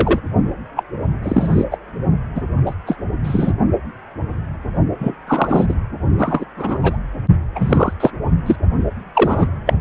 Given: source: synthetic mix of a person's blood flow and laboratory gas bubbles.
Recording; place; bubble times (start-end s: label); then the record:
Doppler ultrasound of blood flow; precordium
0.00-0.20 s: bubbles
0.76-0.83 s: bubbles
1.23-1.65 s: bubbles
1.71-1.78 s: bubbles
2.35-2.42 s: bubbles
2.66-2.74 s: bubbles
2.87-2.97 s: bubbles
3.24-3.52 s: bubbles
4.99-5.15 s: bubbles
5.27-5.66 s: bubbles
5.69-5.75 s: bubbles
6.17-6.45 s: bubbles
6.57-6.78 s: bubbles
6.82-6.98 s: bubbles
7.55-7.93 s: bubbles
8.00-8.10 s: bubbles
8.46-8.56 s: bubbles
9.14-9.48 s: bubbles
9.65-9.73 s: bubbles
From the record:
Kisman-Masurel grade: 233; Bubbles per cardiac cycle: several, 3 to 8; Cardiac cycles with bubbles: 50 to 99%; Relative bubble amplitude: loud (0.450 to 0.775); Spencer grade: 3 (all of the cardiac periods contain showers or single bubble signals, but not dominating or overriding the cardiac motion signals); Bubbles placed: only in the low amplitude regions of the cardiac cycle